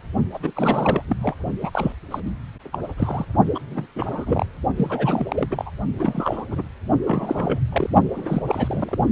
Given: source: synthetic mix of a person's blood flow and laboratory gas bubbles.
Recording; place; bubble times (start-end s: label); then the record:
Doppler ultrasound of blood flow; precordium
0.34-0.38 s: bubbles
0.42-0.52 s: bubbles
0.55-1.03 s: bubbles
1.08-1.17 s: bubbles
1.21-1.34 s: bubbles
1.61-1.93 s: bubbles
2.10-2.20 s: bubbles
2.25-2.31 s: bubbles
2.73-2.78 s: bubbles
2.98-3.25 s: bubbles
3.54-3.59 s: bubbles
3.70-3.86 s: bubbles
3.95-4.45 s: bubbles
4.77-5.46 s: bubbles
5.50-5.70 s: bubbles
5.98-6.62 s: bubbles
7.06-7.59 s: bubbles
7.72-7.95 s: bubbles
8.16-8.43 s: bubbles
8.47-8.98 s: bubbles
From the record:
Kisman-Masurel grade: 342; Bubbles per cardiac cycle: rolling drumbeat, 9 or more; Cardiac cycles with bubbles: 100%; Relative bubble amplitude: moderate (0.250 to 0.450); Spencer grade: 3 (all of the cardiac periods contain showers or single bubble signals, but not dominating or overriding the cardiac motion signals); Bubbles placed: only in the low amplitude regions of the cardiac cycle